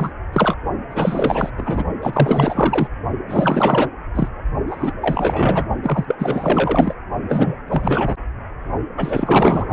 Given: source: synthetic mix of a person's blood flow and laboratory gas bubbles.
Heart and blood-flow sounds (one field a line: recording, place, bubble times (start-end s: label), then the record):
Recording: Doppler ultrasound of blood flow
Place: precordium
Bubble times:
0.00-0.10 s: bubbles
0.33-0.56 s: bubbles
0.90-1.50 s: bubbles
1.56-1.84 s: bubbles
2.01-2.88 s: bubbles
3.28-3.89 s: bubbles
4.14-4.28 s: bubbles
4.67-4.94 s: bubbles
5.01-5.67 s: bubbles
5.83-6.16 s: bubbles
6.18-6.93 s: bubbles
7.29-7.55 s: bubbles
7.68-8.16 s: bubbles
8.96-9.69 s: bubbles
From the record:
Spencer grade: 4 (maximum detectable bubble signal sounding continuously throughout systole and diastole of every cardiac period, and overriding the amplitude of the normal cardiac signals)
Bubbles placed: only in the low amplitude regions of the cardiac cycle